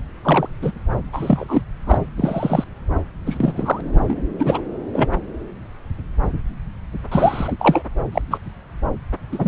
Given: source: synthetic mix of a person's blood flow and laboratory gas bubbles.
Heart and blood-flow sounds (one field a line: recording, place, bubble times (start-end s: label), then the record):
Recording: Doppler ultrasound of blood flow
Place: subclavian vein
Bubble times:
0.23-0.48 s: bubbles
0.62-0.71 s: bubbles
1.12-1.64 s: bubbles
1.86-1.98 s: bubbles
2.17-2.64 s: bubbles
3.25-3.53 s: bubbles
3.56-3.81 s: bubbles
3.92-4.20 s: bubbles
4.39-4.61 s: bubbles
4.92-5.08 s: bubbles
7.12-7.56 s: bubbles
7.59-7.83 s: bubbles
8.12-8.21 s: bubbles
8.30-8.39 s: bubbles
9.31-9.48 s: bubbles
From the record:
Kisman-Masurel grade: 233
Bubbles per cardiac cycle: several, 3 to 8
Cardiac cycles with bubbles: 50 to 99%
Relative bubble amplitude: loud (0.450 to 0.775)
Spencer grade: 3 (all of the cardiac periods contain showers or single bubble signals, but not dominating or overriding the cardiac motion signals)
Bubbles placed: anywhere in the cardiac cycle